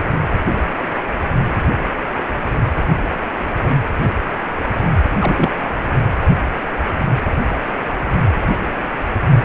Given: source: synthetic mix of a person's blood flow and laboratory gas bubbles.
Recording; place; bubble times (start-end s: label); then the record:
Doppler ultrasound of blood flow; precordium
5.20-5.53 s: bubbles
From the record:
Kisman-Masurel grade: 212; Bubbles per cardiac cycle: several, 3 to 8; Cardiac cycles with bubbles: 1 to 10%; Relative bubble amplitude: moderate (0.250 to 0.450); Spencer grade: 1 (occasional bubble signal discernible with the cardiac motion signal, with majority of cardiac periods free of bubbles); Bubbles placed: anywhere in the cardiac cycle